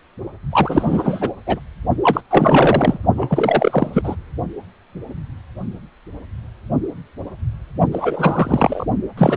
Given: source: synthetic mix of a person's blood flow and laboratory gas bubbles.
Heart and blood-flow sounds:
Doppler ultrasound of blood flow; precordium
0.51-1.32 s: bubbles
1.46-1.59 s: bubbles
2.02-2.21 s: bubbles
2.30-2.98 s: bubbles
3.16-3.90 s: bubbles
3.93-4.16 s: bubbles
7.92-8.86 s: bubbles
9.17-9.37 s: bubbles
From the record:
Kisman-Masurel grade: 333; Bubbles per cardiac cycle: rolling drumbeat, 9 or more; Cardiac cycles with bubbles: 50 to 99%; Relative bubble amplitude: loud (0.450 to 0.775); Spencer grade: 3 (all of the cardiac periods contain showers or single bubble signals, but not dominating or overriding the cardiac motion signals); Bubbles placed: only in the low amplitude regions of the cardiac cycle

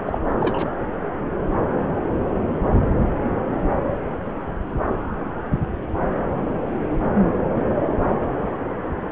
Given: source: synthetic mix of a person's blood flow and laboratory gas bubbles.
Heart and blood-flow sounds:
Doppler ultrasound of blood flow; subclavian vein
0.07-0.19 s: bubbles
0.41-0.69 s: bubbles
From the record:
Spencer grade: 2 (many but less than half of the cardiac periods contain bubble signals, singularly or in groups); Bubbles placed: anywhere in the cardiac cycle

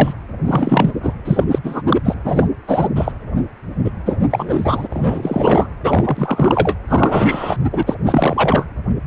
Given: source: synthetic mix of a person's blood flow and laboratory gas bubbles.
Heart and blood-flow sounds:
Doppler ultrasound of blood flow; precordium
0.00-0.14 s: bubbles
0.44-0.92 s: bubbles
1.02-1.13 s: bubbles
1.25-1.44 s: bubbles
1.51-1.58 s: bubbles
1.64-1.81 s: bubbles
1.89-2.00 s: bubbles
2.04-2.14 s: bubbles
2.25-2.47 s: bubbles
2.67-2.89 s: bubbles
2.96-3.12 s: bubbles
3.85-3.91 s: bubbles
4.05-4.15 s: bubbles
4.30-4.87 s: bubbles
4.90-5.68 s: bubbles
5.83-6.75 s: bubbles
6.88-7.56 s: bubbles
7.64-7.70 s: bubbles
7.72-7.83 s: bubbles
7.86-7.95 s: bubbles
8.06-8.66 s: bubbles
From the record:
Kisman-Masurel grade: 343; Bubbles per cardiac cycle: rolling drumbeat, 9 or more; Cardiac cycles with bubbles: 100%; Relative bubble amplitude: loud (0.450 to 0.775); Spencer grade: 3 (all of the cardiac periods contain showers or single bubble signals, but not dominating or overriding the cardiac motion signals); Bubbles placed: anywhere in the cardiac cycle

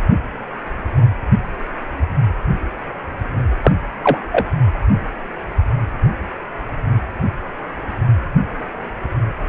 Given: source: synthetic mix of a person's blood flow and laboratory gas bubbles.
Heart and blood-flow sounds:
Doppler ultrasound of blood flow; precordium
3.62-3.72 s: bubbles
4.03-4.18 s: bubbles
4.32-4.47 s: bubbles
From the record:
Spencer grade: 1 (occasional bubble signal discernible with the cardiac motion signal, with majority of cardiac periods free of bubbles); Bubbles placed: anywhere in the cardiac cycle

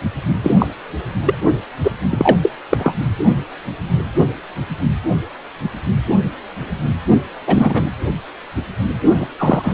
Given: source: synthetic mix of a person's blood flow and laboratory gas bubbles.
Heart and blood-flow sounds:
Doppler ultrasound of blood flow; precordium
0.42-0.53 s: bubbles
0.58-0.67 s: bubbles
1.25-1.35 s: bubbles
1.84-1.91 s: bubbles
2.09-2.37 s: bubbles
2.42-2.50 s: bubbles
2.70-2.94 s: bubbles
7.47-7.90 s: bubbles
9.20-9.27 s: bubbles
9.38-9.74 s: bubbles
From the record:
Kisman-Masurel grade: 223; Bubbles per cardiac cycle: several, 3 to 8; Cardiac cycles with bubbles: 10 to 50%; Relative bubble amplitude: loud (0.450 to 0.775); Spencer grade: 2 (many but less than half of the cardiac periods contain bubble signals, singularly or in groups); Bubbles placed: only in the low amplitude regions of the cardiac cycle

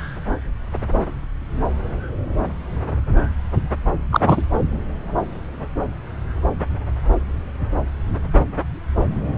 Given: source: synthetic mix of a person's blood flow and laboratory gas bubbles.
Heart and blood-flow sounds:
Doppler ultrasound of blood flow; subclavian vein
4.12-4.43 s: bubbles
From the record:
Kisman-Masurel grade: 213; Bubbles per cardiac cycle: several, 3 to 8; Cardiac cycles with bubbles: 1 to 10%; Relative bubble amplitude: loud (0.450 to 0.775); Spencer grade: 1 (occasional bubble signal discernible with the cardiac motion signal, with majority of cardiac periods free of bubbles); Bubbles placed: anywhere in the cardiac cycle

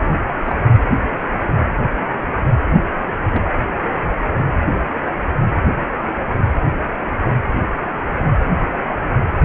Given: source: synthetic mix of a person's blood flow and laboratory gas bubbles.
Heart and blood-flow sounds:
Doppler ultrasound of blood flow; precordium
0.04-0.08 s: bubbles
0.42-0.54 s: bubbles
3.33-3.42 s: bubbles
From the record:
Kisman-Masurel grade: 121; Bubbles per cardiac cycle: 1 to 2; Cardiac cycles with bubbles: 10 to 50%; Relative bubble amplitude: barely perceptible (0.100 to 0.250); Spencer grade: 2 (many but less than half of the cardiac periods contain bubble signals, singularly or in groups); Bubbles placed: anywhere in the cardiac cycle

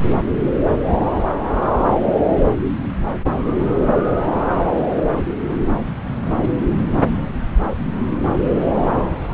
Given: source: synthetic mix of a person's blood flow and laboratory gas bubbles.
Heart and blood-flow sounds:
Doppler ultrasound of blood flow; subclavian vein
no bubbles
From the record:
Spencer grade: 0 (complete lack of bubble signals)

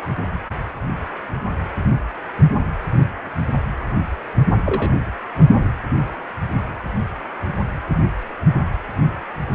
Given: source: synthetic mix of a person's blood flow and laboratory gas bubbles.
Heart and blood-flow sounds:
Doppler ultrasound of blood flow; precordium
4.65-4.92 s: bubbles
From the record:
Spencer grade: 1 (occasional bubble signal discernible with the cardiac motion signal, with majority of cardiac periods free of bubbles); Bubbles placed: anywhere in the cardiac cycle

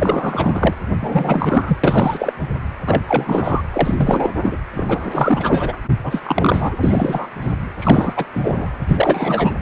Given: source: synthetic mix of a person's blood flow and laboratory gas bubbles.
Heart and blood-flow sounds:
Doppler ultrasound of blood flow; precordium
0.00-0.74 s: bubbles
0.99-1.77 s: bubbles
1.83-2.33 s: bubbles
2.86-3.02 s: bubbles
3.08-3.61 s: bubbles
3.72-4.33 s: bubbles
4.42-4.58 s: bubbles
4.75-5.76 s: bubbles
6.03-6.75 s: bubbles
6.83-7.27 s: bubbles
7.41-7.53 s: bubbles
7.78-8.25 s: bubbles
8.33-8.77 s: bubbles
8.88-9.53 s: bubbles
From the record:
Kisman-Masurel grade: 343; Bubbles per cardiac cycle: rolling drumbeat, 9 or more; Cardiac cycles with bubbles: 100%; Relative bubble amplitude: loud (0.450 to 0.775); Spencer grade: 3 (all of the cardiac periods contain showers or single bubble signals, but not dominating or overriding the cardiac motion signals); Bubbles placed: anywhere in the cardiac cycle

